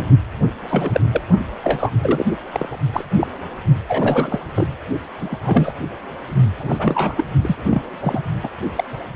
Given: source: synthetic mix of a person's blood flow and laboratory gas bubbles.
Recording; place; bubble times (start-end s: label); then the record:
Doppler ultrasound of blood flow; precordium
0.00-0.06 s: bubbles
0.69-1.01 s: bubbles
1.13-1.24 s: bubbles
1.64-1.90 s: bubbles
2.01-2.25 s: bubbles
2.52-2.83 s: bubbles
2.92-3.05 s: bubbles
3.21-3.27 s: bubbles
3.88-4.39 s: bubbles
4.55-4.67 s: bubbles
5.20-5.73 s: bubbles
6.59-6.75 s: bubbles
6.79-7.25 s: bubbles
7.41-7.55 s: bubbles
7.71-7.82 s: bubbles
8.00-8.22 s: bubbles
8.43-8.48 s: bubbles
8.75-8.84 s: bubbles
From the record:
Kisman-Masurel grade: 232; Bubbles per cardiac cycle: several, 3 to 8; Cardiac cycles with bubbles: 50 to 99%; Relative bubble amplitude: moderate (0.250 to 0.450); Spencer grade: 3 (all of the cardiac periods contain showers or single bubble signals, but not dominating or overriding the cardiac motion signals); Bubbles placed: only in the low amplitude regions of the cardiac cycle